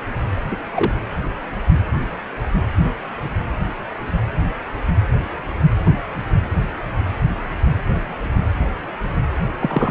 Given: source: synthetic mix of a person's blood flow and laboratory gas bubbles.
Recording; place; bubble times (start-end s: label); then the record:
Doppler ultrasound of blood flow; precordium
0.51-0.57 s: bubbles
0.74-0.92 s: bubbles
9.60-9.91 s: bubbles
From the record:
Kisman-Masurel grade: 113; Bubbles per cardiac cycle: 1 to 2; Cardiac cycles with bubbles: 1 to 10%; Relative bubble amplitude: loud (0.450 to 0.775); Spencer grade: 1 (occasional bubble signal discernible with the cardiac motion signal, with majority of cardiac periods free of bubbles); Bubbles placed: anywhere in the cardiac cycle